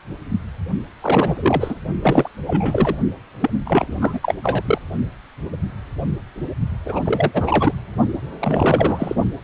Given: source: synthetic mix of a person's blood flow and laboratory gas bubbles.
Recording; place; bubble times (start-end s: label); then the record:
Doppler ultrasound of blood flow; precordium
1.01-1.79 s: bubbles
2.02-2.29 s: bubbles
2.46-2.96 s: bubbles
3.41-3.50 s: bubbles
3.65-4.34 s: bubbles
4.43-4.62 s: bubbles
4.65-4.78 s: bubbles
6.85-6.99 s: bubbles
7.04-7.72 s: bubbles
8.39-9.14 s: bubbles
From the record:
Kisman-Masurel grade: 333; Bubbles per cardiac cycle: rolling drumbeat, 9 or more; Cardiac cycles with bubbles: 50 to 99%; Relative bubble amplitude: loud (0.450 to 0.775); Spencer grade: 3 (all of the cardiac periods contain showers or single bubble signals, but not dominating or overriding the cardiac motion signals); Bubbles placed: only in the low amplitude regions of the cardiac cycle